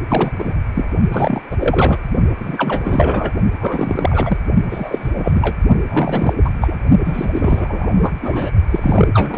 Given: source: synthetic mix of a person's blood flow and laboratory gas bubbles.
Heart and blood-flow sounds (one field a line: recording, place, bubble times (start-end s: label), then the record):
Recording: Doppler ultrasound of blood flow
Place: precordium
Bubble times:
0.08-0.32 s: bubbles
0.38-0.53 s: bubbles
0.75-0.85 s: bubbles
1.11-1.42 s: bubbles
1.51-1.57 s: bubbles
1.59-1.99 s: bubbles
2.39-3.32 s: bubbles
3.60-4.38 s: bubbles
4.69-5.56 s: bubbles
5.88-6.33 s: bubbles
6.44-6.50 s: bubbles
6.61-6.77 s: bubbles
7.04-8.14 s: bubbles
8.21-8.51 s: bubbles
8.70-9.08 s: bubbles
9.13-9.38 s: bubbles
From the record:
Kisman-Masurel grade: 343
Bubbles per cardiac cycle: rolling drumbeat, 9 or more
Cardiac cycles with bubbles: 100%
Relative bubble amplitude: loud (0.450 to 0.775)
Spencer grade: 3 (all of the cardiac periods contain showers or single bubble signals, but not dominating or overriding the cardiac motion signals)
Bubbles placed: only in the low amplitude regions of the cardiac cycle